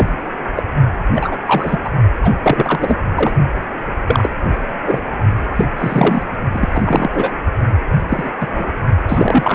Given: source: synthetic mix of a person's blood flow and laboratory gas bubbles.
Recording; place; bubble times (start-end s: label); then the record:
Doppler ultrasound of blood flow; precordium
0.00-0.09 s: bubbles
0.56-0.62 s: bubbles
1.15-1.36 s: bubbles
1.45-1.79 s: bubbles
1.84-1.90 s: bubbles
2.19-2.35 s: bubbles
2.43-2.96 s: bubbles
3.16-3.32 s: bubbles
4.07-4.29 s: bubbles
4.85-5.02 s: bubbles
5.56-5.66 s: bubbles
5.78-6.23 s: bubbles
6.52-6.69 s: bubbles
6.74-7.09 s: bubbles
7.13-7.33 s: bubbles
8.09-8.30 s: bubbles
8.40-8.47 s: bubbles
8.51-8.72 s: bubbles
9.08-9.55 s: bubbles
From the record:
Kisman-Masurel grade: 233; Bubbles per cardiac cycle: several, 3 to 8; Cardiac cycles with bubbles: 50 to 99%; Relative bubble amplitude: loud (0.450 to 0.775); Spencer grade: 3 (all of the cardiac periods contain showers or single bubble signals, but not dominating or overriding the cardiac motion signals); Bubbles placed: only in the low amplitude regions of the cardiac cycle